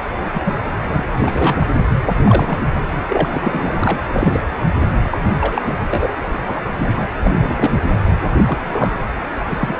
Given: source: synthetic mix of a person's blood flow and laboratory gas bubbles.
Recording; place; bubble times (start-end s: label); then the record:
Doppler ultrasound of blood flow; precordium
0.33-0.41 s: bubbles
0.45-0.55 s: bubbles
0.90-1.04 s: bubbles
1.17-1.67 s: bubbles
1.89-2.08 s: bubbles
2.23-2.61 s: bubbles
2.75-2.79 s: bubbles
3.07-3.97 s: bubbles
4.11-4.40 s: bubbles
5.10-5.18 s: bubbles
5.41-5.62 s: bubbles
5.67-5.75 s: bubbles
5.90-6.08 s: bubbles
6.46-6.55 s: bubbles
6.78-7.04 s: bubbles
7.21-7.71 s: bubbles
8.46-8.95 s: bubbles
9.49-9.76 s: bubbles
From the record:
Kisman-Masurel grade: 242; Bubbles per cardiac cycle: several, 3 to 8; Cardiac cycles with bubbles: 100%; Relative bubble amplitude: moderate (0.250 to 0.450); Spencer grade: 3 (all of the cardiac periods contain showers or single bubble signals, but not dominating or overriding the cardiac motion signals); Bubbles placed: anywhere in the cardiac cycle